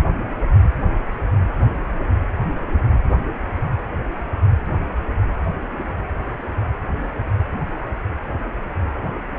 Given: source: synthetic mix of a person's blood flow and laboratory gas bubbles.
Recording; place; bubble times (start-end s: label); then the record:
Doppler ultrasound of blood flow; precordium
no bubbles
From the record:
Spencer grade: 0 (complete lack of bubble signals)